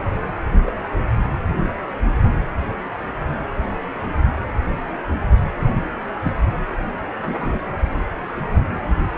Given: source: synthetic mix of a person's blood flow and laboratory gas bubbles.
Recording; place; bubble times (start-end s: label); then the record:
Doppler ultrasound of blood flow; precordium
0.66-0.71 s: bubbles
6.21-6.32 s: bubbles
7.21-7.59 s: bubbles
From the record:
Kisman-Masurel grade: 121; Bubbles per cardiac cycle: 1 to 2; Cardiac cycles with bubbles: 10 to 50%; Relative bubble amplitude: barely perceptible (0.100 to 0.250); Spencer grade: 2 (many but less than half of the cardiac periods contain bubble signals, singularly or in groups); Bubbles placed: anywhere in the cardiac cycle